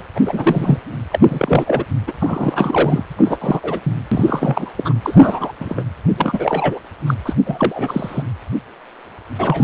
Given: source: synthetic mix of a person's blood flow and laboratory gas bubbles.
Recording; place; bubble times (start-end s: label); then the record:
Doppler ultrasound of blood flow; precordium
0.15-0.81 s: bubbles
1.11-1.84 s: bubbles
2.07-2.12 s: bubbles
2.19-3.04 s: bubbles
3.17-3.38 s: bubbles
3.40-3.60 s: bubbles
3.63-3.80 s: bubbles
3.83-3.97 s: bubbles
4.12-4.70 s: bubbles
4.78-4.94 s: bubbles
5.03-5.53 s: bubbles
5.59-5.83 s: bubbles
6.17-6.79 s: bubbles
7.06-7.14 s: bubbles
7.25-7.34 s: bubbles
7.46-8.23 s: bubbles
9.38-9.64 s: bubbles
From the record:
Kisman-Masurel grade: 333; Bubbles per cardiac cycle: rolling drumbeat, 9 or more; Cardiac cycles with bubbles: 50 to 99%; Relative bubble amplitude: loud (0.450 to 0.775); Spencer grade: 3 (all of the cardiac periods contain showers or single bubble signals, but not dominating or overriding the cardiac motion signals); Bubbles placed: anywhere in the cardiac cycle